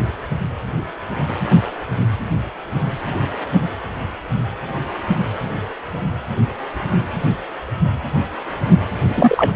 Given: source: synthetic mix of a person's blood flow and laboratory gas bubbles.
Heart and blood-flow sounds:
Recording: Doppler ultrasound of blood flow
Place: precordium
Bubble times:
9.09-9.51 s: bubbles
From the record:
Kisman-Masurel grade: 213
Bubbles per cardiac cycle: several, 3 to 8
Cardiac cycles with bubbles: 1 to 10%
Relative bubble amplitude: loud (0.450 to 0.775)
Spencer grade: 1 (occasional bubble signal discernible with the cardiac motion signal, with majority of cardiac periods free of bubbles)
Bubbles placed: anywhere in the cardiac cycle

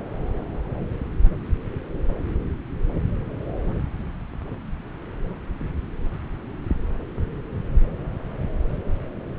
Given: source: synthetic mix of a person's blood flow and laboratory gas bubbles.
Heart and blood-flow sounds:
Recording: Doppler ultrasound of blood flow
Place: subclavian vein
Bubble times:
no bubbles
From the record:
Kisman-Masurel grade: 000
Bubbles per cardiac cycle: 0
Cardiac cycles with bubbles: 0%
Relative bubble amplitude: no bubbles discernible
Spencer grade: 0 (complete lack of bubble signals)

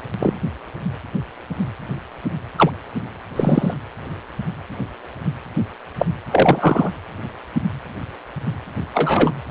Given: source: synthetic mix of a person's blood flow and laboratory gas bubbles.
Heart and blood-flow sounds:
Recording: Doppler ultrasound of blood flow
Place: precordium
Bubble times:
0.20-0.34 s: bubbles
2.56-2.70 s: bubbles
3.35-3.74 s: bubbles
5.98-6.06 s: bubbles
6.31-6.91 s: bubbles
8.94-9.31 s: bubbles
From the record:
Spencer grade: 2 (many but less than half of the cardiac periods contain bubble signals, singularly or in groups)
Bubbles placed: anywhere in the cardiac cycle

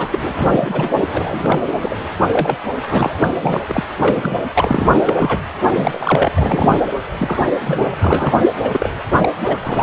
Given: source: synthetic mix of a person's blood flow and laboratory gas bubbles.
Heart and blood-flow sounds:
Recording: Doppler ultrasound of blood flow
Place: precordium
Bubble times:
0.00-0.08 s: bubbles
0.11-0.19 s: bubbles
0.35-0.92 s: bubbles
1.14-1.62 s: bubbles
1.67-1.77 s: bubbles
1.82-1.98 s: bubbles
2.33-2.58 s: bubbles
2.89-3.35 s: bubbles
3.42-3.65 s: bubbles
3.68-3.83 s: bubbles
3.98-4.41 s: bubbles
4.54-5.00 s: bubbles
5.06-5.39 s: bubbles
5.67-6.32 s: bubbles
6.35-6.77 s: bubbles
7.19-7.49 s: bubbles
7.59-7.96 s: bubbles
8.01-8.45 s: bubbles
8.62-8.89 s: bubbles
9.19-9.29 s: bubbles
9.44-9.58 s: bubbles
9.63-9.83 s: bubbles
From the record:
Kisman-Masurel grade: 243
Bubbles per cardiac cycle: several, 3 to 8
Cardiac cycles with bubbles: 100%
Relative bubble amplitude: loud (0.450 to 0.775)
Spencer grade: 3 (all of the cardiac periods contain showers or single bubble signals, but not dominating or overriding the cardiac motion signals)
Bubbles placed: anywhere in the cardiac cycle

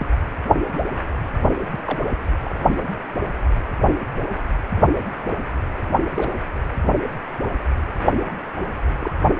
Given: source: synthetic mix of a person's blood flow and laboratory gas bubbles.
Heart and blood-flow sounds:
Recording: Doppler ultrasound of blood flow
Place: precordium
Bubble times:
0.00-0.11 s: bubbles
1.71-1.99 s: bubbles
2.44-2.58 s: bubbles
6.15-6.32 s: bubbles
8.99-9.14 s: bubbles
From the record:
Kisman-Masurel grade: 121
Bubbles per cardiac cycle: 1 to 2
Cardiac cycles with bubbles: 10 to 50%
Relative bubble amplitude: barely perceptible (0.100 to 0.250)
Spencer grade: 2 (many but less than half of the cardiac periods contain bubble signals, singularly or in groups)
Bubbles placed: anywhere in the cardiac cycle

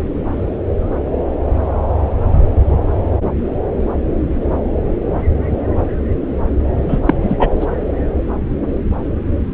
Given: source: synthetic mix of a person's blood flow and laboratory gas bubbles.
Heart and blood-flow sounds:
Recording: Doppler ultrasound of blood flow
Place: subclavian vein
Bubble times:
6.88-7.00 s: bubbles
7.05-7.14 s: bubbles
7.23-7.35 s: bubbles
7.39-7.50 s: bubbles
7.60-7.66 s: bubbles
From the record:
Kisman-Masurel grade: 223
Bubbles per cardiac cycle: several, 3 to 8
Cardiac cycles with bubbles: 10 to 50%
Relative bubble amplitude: loud (0.450 to 0.775)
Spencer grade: 2 (many but less than half of the cardiac periods contain bubble signals, singularly or in groups)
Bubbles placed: anywhere in the cardiac cycle

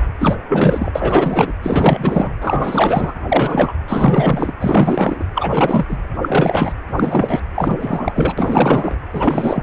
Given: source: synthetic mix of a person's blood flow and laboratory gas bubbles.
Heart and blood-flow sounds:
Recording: Doppler ultrasound of blood flow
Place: precordium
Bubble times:
0.18-0.37 s: bubbles
0.48-0.92 s: bubbles
0.94-1.54 s: bubbles
1.62-2.33 s: bubbles
2.41-3.13 s: bubbles
3.28-3.75 s: bubbles
3.88-4.54 s: bubbles
4.60-5.25 s: bubbles
5.34-5.86 s: bubbles
5.89-5.98 s: bubbles
6.21-6.72 s: bubbles
6.93-7.42 s: bubbles
7.54-8.99 s: bubbles
9.12-9.63 s: bubbles
From the record:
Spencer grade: 4 (maximum detectable bubble signal sounding continuously throughout systole and diastole of every cardiac period, and overriding the amplitude of the normal cardiac signals)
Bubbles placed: anywhere in the cardiac cycle

